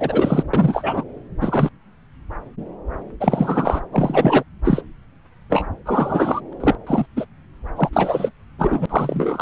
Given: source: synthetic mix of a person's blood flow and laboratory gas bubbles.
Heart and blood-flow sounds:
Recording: Doppler ultrasound of blood flow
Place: subclavian vein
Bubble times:
0.00-0.44 s: bubbles
0.53-1.04 s: bubbles
1.41-1.69 s: bubbles
3.20-3.81 s: bubbles
3.92-4.43 s: bubbles
4.64-4.81 s: bubbles
5.50-5.66 s: bubbles
5.85-6.40 s: bubbles
6.51-6.53 s: bubbles
6.60-6.75 s: bubbles
6.86-7.06 s: bubbles
7.16-7.25 s: bubbles
7.75-7.89 s: bubbles
7.93-8.32 s: bubbles
8.59-8.86 s: bubbles
8.89-9.42 s: bubbles
From the record:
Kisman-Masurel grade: 243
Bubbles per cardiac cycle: several, 3 to 8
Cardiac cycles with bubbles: 100%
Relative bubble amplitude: loud (0.450 to 0.775)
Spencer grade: 3 (all of the cardiac periods contain showers or single bubble signals, but not dominating or overriding the cardiac motion signals)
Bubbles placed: anywhere in the cardiac cycle

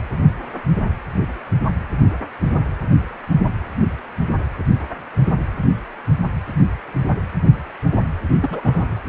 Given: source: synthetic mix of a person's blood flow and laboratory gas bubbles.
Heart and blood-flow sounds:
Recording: Doppler ultrasound of blood flow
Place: precordium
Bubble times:
8.42-8.95 s: bubbles
From the record:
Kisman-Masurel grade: 211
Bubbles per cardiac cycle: several, 3 to 8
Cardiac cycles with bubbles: 1 to 10%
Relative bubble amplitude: barely perceptible (0.100 to 0.250)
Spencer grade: 1 (occasional bubble signal discernible with the cardiac motion signal, with majority of cardiac periods free of bubbles)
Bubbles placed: anywhere in the cardiac cycle

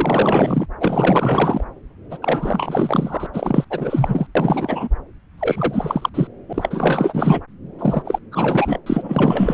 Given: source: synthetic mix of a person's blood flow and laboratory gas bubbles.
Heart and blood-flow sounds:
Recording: Doppler ultrasound of blood flow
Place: subclavian vein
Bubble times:
0.00-0.66 s: bubbles
0.80-1.65 s: bubbles
2.10-2.18 s: bubbles
2.22-3.27 s: bubbles
3.33-3.65 s: bubbles
3.70-4.26 s: bubbles
4.35-4.88 s: bubbles
5.38-6.09 s: bubbles
6.14-6.27 s: bubbles
6.48-7.40 s: bubbles
7.79-8.19 s: bubbles
8.31-8.79 s: bubbles
8.86-9.54 s: bubbles
From the record:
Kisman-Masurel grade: 444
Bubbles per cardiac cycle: continuous sound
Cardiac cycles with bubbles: 100%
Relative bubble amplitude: maximal (0.775 to 0.999)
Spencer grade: 4 (maximum detectable bubble signal sounding continuously throughout systole and diastole of every cardiac period, and overriding the amplitude of the normal cardiac signals)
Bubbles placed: anywhere in the cardiac cycle

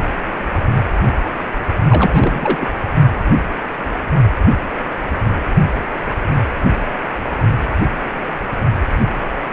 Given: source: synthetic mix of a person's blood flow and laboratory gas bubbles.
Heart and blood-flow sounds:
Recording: Doppler ultrasound of blood flow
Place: precordium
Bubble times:
1.88-2.58 s: bubbles
2.60-2.67 s: bubbles
From the record:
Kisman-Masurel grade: 222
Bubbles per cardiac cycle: several, 3 to 8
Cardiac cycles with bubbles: 10 to 50%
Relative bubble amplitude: moderate (0.250 to 0.450)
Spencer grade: 2 (many but less than half of the cardiac periods contain bubble signals, singularly or in groups)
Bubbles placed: only in the low amplitude regions of the cardiac cycle

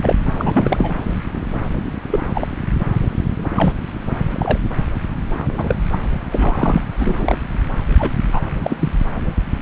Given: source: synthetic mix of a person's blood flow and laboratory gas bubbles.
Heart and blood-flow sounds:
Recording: Doppler ultrasound of blood flow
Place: subclavian vein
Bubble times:
0.03-0.15 s: bubbles
0.38-0.95 s: bubbles
2.11-2.20 s: bubbles
2.34-2.48 s: bubbles
3.56-3.73 s: bubbles
4.34-4.58 s: bubbles
5.57-5.75 s: bubbles
5.92-5.98 s: bubbles
6.29-6.82 s: bubbles
6.98-7.38 s: bubbles
7.99-8.11 s: bubbles
8.28-8.50 s: bubbles
8.64-8.77 s: bubbles
8.79-8.89 s: bubbles
From the record:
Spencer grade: 3 (all of the cardiac periods contain showers or single bubble signals, but not dominating or overriding the cardiac motion signals)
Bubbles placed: anywhere in the cardiac cycle

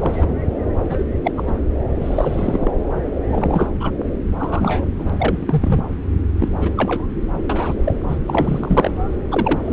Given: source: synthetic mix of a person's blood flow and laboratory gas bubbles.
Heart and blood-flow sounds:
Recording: Doppler ultrasound of blood flow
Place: subclavian vein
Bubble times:
0.00-0.34 s: bubbles
0.85-1.03 s: bubbles
1.23-1.31 s: bubbles
1.37-1.59 s: bubbles
2.01-2.71 s: bubbles
3.28-3.68 s: bubbles
3.80-3.90 s: bubbles
4.39-4.85 s: bubbles
4.99-5.81 s: bubbles
6.39-6.49 s: bubbles
6.61-6.70 s: bubbles
6.77-7.04 s: bubbles
7.49-7.75 s: bubbles
7.84-7.94 s: bubbles
8.09-8.17 s: bubbles
8.26-8.94 s: bubbles
9.31-9.60 s: bubbles
9.65-9.73 s: bubbles
From the record:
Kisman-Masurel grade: 242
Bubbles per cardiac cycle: several, 3 to 8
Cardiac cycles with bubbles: 100%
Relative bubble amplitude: moderate (0.250 to 0.450)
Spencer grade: 3 (all of the cardiac periods contain showers or single bubble signals, but not dominating or overriding the cardiac motion signals)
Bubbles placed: anywhere in the cardiac cycle

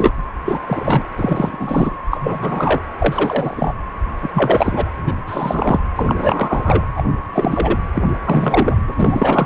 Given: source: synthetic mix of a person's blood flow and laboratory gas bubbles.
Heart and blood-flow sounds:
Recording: Doppler ultrasound of blood flow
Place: precordium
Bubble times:
0.00-0.13 s: bubbles
0.44-0.59 s: bubbles
0.67-1.07 s: bubbles
1.17-1.96 s: bubbles
2.10-2.79 s: bubbles
2.98-3.74 s: bubbles
4.22-4.31 s: bubbles
4.33-4.91 s: bubbles
5.06-5.14 s: bubbles
5.27-5.79 s: bubbles
5.96-6.85 s: bubbles
6.96-7.03 s: bubbles
7.33-7.79 s: bubbles
7.95-8.09 s: bubbles
8.24-8.84 s: bubbles
8.88-9.46 s: bubbles
From the record:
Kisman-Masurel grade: 343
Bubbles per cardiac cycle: rolling drumbeat, 9 or more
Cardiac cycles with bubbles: 100%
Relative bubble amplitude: loud (0.450 to 0.775)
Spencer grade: 3 (all of the cardiac periods contain showers or single bubble signals, but not dominating or overriding the cardiac motion signals)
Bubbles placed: anywhere in the cardiac cycle

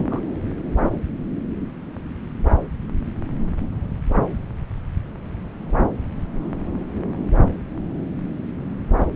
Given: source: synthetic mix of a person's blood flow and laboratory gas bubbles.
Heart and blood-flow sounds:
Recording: Doppler ultrasound of blood flow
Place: subclavian vein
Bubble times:
0.00-0.20 s: bubbles
From the record:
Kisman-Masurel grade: 211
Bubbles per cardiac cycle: several, 3 to 8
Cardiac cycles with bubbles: 1 to 10%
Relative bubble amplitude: barely perceptible (0.100 to 0.250)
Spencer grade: 1 (occasional bubble signal discernible with the cardiac motion signal, with majority of cardiac periods free of bubbles)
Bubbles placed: anywhere in the cardiac cycle

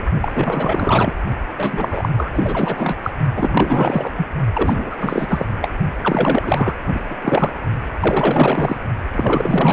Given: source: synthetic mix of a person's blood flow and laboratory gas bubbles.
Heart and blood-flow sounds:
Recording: Doppler ultrasound of blood flow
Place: precordium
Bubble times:
0.00-0.04 s: bubbles
0.21-1.16 s: bubbles
1.56-2.09 s: bubbles
2.17-2.97 s: bubbles
3.02-3.10 s: bubbles
3.35-4.12 s: bubbles
4.17-4.25 s: bubbles
4.54-5.46 s: bubbles
5.61-5.68 s: bubbles
6.01-6.74 s: bubbles
6.86-7.01 s: bubbles
7.10-7.16 s: bubbles
7.21-7.51 s: bubbles
8.00-8.76 s: bubbles
9.12-9.73 s: bubbles
From the record:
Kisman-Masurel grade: 444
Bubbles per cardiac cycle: continuous sound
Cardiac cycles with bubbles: 100%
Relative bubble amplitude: maximal (0.775 to 0.999)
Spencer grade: 4 (maximum detectable bubble signal sounding continuously throughout systole and diastole of every cardiac period, and overriding the amplitude of the normal cardiac signals)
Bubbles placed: only in the low amplitude regions of the cardiac cycle

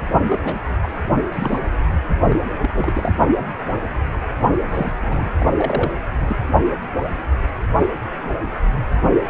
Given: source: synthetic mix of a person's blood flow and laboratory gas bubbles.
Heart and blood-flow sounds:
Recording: Doppler ultrasound of blood flow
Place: precordium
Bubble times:
0.28-0.39 s: bubbles
0.45-0.64 s: bubbles
0.82-0.87 s: bubbles
1.32-1.59 s: bubbles
2.30-2.40 s: bubbles
2.60-3.12 s: bubbles
4.68-4.92 s: bubbles
5.01-5.29 s: bubbles
5.36-5.46 s: bubbles
5.56-5.92 s: bubbles
6.20-6.37 s: bubbles
From the record:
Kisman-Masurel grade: 221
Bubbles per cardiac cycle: several, 3 to 8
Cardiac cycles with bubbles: 10 to 50%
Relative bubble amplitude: barely perceptible (0.100 to 0.250)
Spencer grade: 2 (many but less than half of the cardiac periods contain bubble signals, singularly or in groups)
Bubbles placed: only in the low amplitude regions of the cardiac cycle

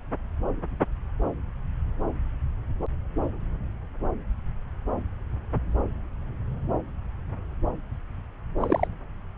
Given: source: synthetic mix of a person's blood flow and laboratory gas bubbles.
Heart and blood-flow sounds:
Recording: Doppler ultrasound of blood flow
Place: subclavian vein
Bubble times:
8.60-8.88 s: bubbles
From the record:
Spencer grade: 1 (occasional bubble signal discernible with the cardiac motion signal, with majority of cardiac periods free of bubbles)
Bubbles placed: anywhere in the cardiac cycle

